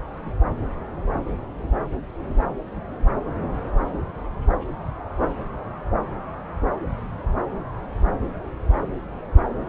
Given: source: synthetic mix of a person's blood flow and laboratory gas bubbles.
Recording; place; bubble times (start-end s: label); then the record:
Doppler ultrasound of blood flow; subclavian vein
no bubbles
From the record:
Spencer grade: 0 (complete lack of bubble signals)